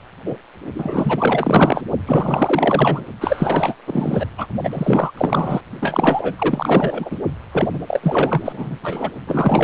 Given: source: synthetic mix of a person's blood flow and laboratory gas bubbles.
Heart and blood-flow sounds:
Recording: Doppler ultrasound of blood flow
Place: precordium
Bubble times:
0.26-0.36 s: bubbles
0.74-1.82 s: bubbles
2.07-3.04 s: bubbles
3.20-3.75 s: bubbles
3.86-4.26 s: bubbles
4.38-4.46 s: bubbles
4.63-5.12 s: bubbles
5.17-5.61 s: bubbles
5.80-6.36 s: bubbles
6.38-7.20 s: bubbles
7.52-7.68 s: bubbles
7.73-8.76 s: bubbles
8.83-9.12 s: bubbles
9.27-9.64 s: bubbles
From the record:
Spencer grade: 4 (maximum detectable bubble signal sounding continuously throughout systole and diastole of every cardiac period, and overriding the amplitude of the normal cardiac signals)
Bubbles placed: only in the low amplitude regions of the cardiac cycle

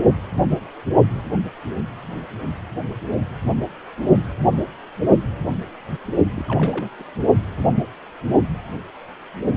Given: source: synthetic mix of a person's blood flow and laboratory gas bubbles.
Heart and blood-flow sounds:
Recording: Doppler ultrasound of blood flow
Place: precordium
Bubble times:
6.34-6.44 s: bubbles
6.48-6.89 s: bubbles
6.99-7.03 s: bubbles
From the record:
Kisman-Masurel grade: 211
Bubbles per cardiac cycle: several, 3 to 8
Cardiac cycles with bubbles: 1 to 10%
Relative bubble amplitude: barely perceptible (0.100 to 0.250)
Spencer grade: 1 (occasional bubble signal discernible with the cardiac motion signal, with majority of cardiac periods free of bubbles)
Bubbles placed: only in the low amplitude regions of the cardiac cycle

